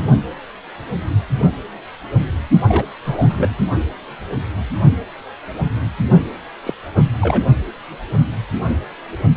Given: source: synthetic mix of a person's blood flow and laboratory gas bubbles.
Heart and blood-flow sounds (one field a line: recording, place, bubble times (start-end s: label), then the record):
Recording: Doppler ultrasound of blood flow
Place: precordium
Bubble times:
2.67-2.85 s: bubbles
3.04-3.55 s: bubbles
6.65-6.74 s: bubbles
6.96-7.04 s: bubbles
7.21-7.44 s: bubbles
From the record:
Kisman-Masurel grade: 222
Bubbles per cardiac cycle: several, 3 to 8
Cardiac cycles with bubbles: 10 to 50%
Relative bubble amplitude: moderate (0.250 to 0.450)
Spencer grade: 2 (many but less than half of the cardiac periods contain bubble signals, singularly or in groups)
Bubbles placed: only in the low amplitude regions of the cardiac cycle